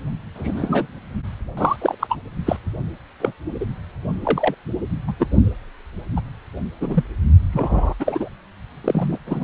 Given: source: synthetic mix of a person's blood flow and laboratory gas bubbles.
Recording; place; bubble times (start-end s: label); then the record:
Doppler ultrasound of blood flow; precordium
0.34-0.87 s: bubbles
1.57-1.77 s: bubbles
1.81-1.95 s: bubbles
2.00-2.18 s: bubbles
2.46-2.57 s: bubbles
3.20-3.32 s: bubbles
3.60-3.65 s: bubbles
4.23-4.54 s: bubbles
5.07-5.15 s: bubbles
5.19-5.27 s: bubbles
6.16-6.21 s: bubbles
6.80-7.04 s: bubbles
7.52-7.94 s: bubbles
8.00-8.28 s: bubbles
8.84-9.18 s: bubbles
9.26-9.44 s: bubbles
From the record:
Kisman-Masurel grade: 232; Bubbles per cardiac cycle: several, 3 to 8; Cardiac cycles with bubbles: 50 to 99%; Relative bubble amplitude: moderate (0.250 to 0.450); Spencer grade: 3 (all of the cardiac periods contain showers or single bubble signals, but not dominating or overriding the cardiac motion signals); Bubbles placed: only in the low amplitude regions of the cardiac cycle